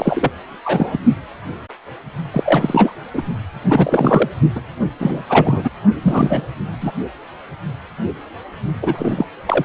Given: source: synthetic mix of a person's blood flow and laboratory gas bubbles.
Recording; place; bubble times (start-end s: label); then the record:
Doppler ultrasound of blood flow; precordium
0.00-0.29 s: bubbles
0.62-1.00 s: bubbles
2.32-2.92 s: bubbles
3.13-3.22 s: bubbles
3.62-4.29 s: bubbles
4.55-4.61 s: bubbles
5.00-5.22 s: bubbles
5.29-5.70 s: bubbles
6.02-6.47 s: bubbles
6.80-6.92 s: bubbles
8.82-9.27 s: bubbles
9.46-9.65 s: bubbles
From the record:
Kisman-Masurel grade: 333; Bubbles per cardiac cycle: rolling drumbeat, 9 or more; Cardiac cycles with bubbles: 50 to 99%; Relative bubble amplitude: loud (0.450 to 0.775); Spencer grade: 3 (all of the cardiac periods contain showers or single bubble signals, but not dominating or overriding the cardiac motion signals); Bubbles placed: only in the low amplitude regions of the cardiac cycle